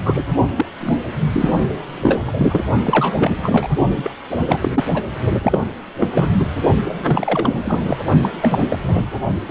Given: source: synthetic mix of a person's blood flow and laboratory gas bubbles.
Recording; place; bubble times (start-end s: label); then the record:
Doppler ultrasound of blood flow; precordium
0.05-0.22 s: bubbles
0.57-0.66 s: bubbles
0.80-1.04 s: bubbles
1.32-1.50 s: bubbles
2.00-2.23 s: bubbles
2.27-2.64 s: bubbles
2.83-3.15 s: bubbles
3.19-3.36 s: bubbles
3.43-3.68 s: bubbles
3.97-4.14 s: bubbles
4.29-4.84 s: bubbles
4.93-5.03 s: bubbles
5.41-5.59 s: bubbles
6.00-6.08 s: bubbles
6.14-6.46 s: bubbles
6.84-7.97 s: bubbles
8.22-8.30 s: bubbles
8.42-8.60 s: bubbles
8.69-8.79 s: bubbles
8.88-9.05 s: bubbles
9.48-9.51 s: bubbles
From the record:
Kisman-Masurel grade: 343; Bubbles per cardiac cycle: rolling drumbeat, 9 or more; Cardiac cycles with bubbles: 100%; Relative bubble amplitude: loud (0.450 to 0.775); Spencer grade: 3 (all of the cardiac periods contain showers or single bubble signals, but not dominating or overriding the cardiac motion signals); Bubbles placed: only in the low amplitude regions of the cardiac cycle